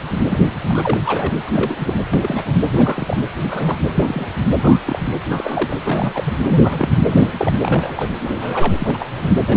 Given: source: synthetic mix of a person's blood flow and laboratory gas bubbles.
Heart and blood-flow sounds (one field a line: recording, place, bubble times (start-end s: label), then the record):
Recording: Doppler ultrasound of blood flow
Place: precordium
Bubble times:
0.29-0.51 s: bubbles
0.69-0.98 s: bubbles
1.06-1.33 s: bubbles
1.47-1.76 s: bubbles
1.80-1.95 s: bubbles
2.10-2.42 s: bubbles
2.45-2.53 s: bubbles
2.74-3.17 s: bubbles
3.42-3.79 s: bubbles
3.94-4.28 s: bubbles
4.55-5.00 s: bubbles
5.29-5.78 s: bubbles
5.84-6.33 s: bubbles
6.47-7.02 s: bubbles
7.04-7.33 s: bubbles
7.37-7.53 s: bubbles
7.60-8.09 s: bubbles
8.20-8.76 s: bubbles
8.79-9.33 s: bubbles
9.47-9.57 s: bubbles
From the record:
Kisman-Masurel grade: 242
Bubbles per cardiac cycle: several, 3 to 8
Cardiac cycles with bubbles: 100%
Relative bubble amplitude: moderate (0.250 to 0.450)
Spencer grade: 3 (all of the cardiac periods contain showers or single bubble signals, but not dominating or overriding the cardiac motion signals)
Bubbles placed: anywhere in the cardiac cycle